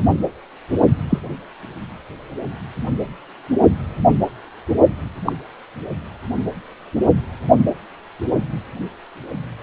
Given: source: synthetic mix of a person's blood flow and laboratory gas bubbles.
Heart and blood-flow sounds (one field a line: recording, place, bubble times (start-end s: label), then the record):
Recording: Doppler ultrasound of blood flow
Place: precordium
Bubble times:
1.09-1.20 s: bubbles
5.25-5.33 s: bubbles
From the record:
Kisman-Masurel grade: 123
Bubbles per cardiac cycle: 1 to 2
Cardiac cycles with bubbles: 10 to 50%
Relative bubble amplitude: loud (0.450 to 0.775)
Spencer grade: 2 (many but less than half of the cardiac periods contain bubble signals, singularly or in groups)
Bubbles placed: only in the low amplitude regions of the cardiac cycle